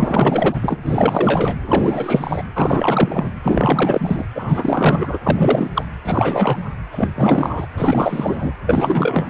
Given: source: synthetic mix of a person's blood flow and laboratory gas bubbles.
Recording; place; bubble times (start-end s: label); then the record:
Doppler ultrasound of blood flow; precordium
0.00-0.58 s: bubbles
0.61-0.78 s: bubbles
0.85-1.56 s: bubbles
1.66-2.44 s: bubbles
2.54-3.25 s: bubbles
3.43-4.25 s: bubbles
4.34-5.18 s: bubbles
5.24-5.70 s: bubbles
5.75-5.84 s: bubbles
6.04-6.71 s: bubbles
6.91-7.08 s: bubbles
7.15-7.67 s: bubbles
7.77-8.52 s: bubbles
8.66-9.28 s: bubbles
From the record:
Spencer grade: 4 (maximum detectable bubble signal sounding continuously throughout systole and diastole of every cardiac period, and overriding the amplitude of the normal cardiac signals); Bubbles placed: anywhere in the cardiac cycle